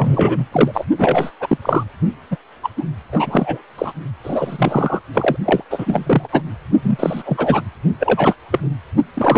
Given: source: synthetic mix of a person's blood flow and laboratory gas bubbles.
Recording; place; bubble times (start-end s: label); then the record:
Doppler ultrasound of blood flow; precordium
0.00-0.45 s: bubbles
0.52-0.85 s: bubbles
0.97-1.31 s: bubbles
1.40-1.58 s: bubbles
1.62-1.83 s: bubbles
2.31-2.37 s: bubbles
2.63-2.70 s: bubbles
2.77-2.84 s: bubbles
3.12-3.63 s: bubbles
3.78-3.92 s: bubbles
4.24-5.00 s: bubbles
5.13-5.37 s: bubbles
5.45-5.62 s: bubbles
5.71-6.29 s: bubbles
6.32-6.42 s: bubbles
6.82-7.62 s: bubbles
7.99-8.35 s: bubbles
8.51-8.60 s: bubbles
9.14-9.38 s: bubbles
From the record:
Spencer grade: 3 (all of the cardiac periods contain showers or single bubble signals, but not dominating or overriding the cardiac motion signals); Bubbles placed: only in the low amplitude regions of the cardiac cycle